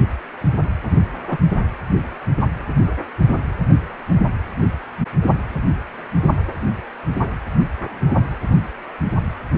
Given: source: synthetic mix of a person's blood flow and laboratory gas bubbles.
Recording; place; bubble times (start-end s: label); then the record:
Doppler ultrasound of blood flow; precordium
1.30-1.38 s: bubbles
From the record:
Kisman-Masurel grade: 113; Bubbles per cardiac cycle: 1 to 2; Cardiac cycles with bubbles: 1 to 10%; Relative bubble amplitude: loud (0.450 to 0.775); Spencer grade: 1 (occasional bubble signal discernible with the cardiac motion signal, with majority of cardiac periods free of bubbles); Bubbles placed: anywhere in the cardiac cycle